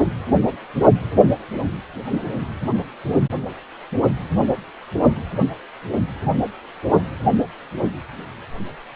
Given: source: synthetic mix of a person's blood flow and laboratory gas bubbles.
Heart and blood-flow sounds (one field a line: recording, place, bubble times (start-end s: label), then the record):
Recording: Doppler ultrasound of blood flow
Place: precordium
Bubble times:
no bubbles
From the record:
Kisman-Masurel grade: 000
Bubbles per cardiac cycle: 0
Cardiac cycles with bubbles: 0%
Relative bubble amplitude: no bubbles discernible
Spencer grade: 0 (complete lack of bubble signals)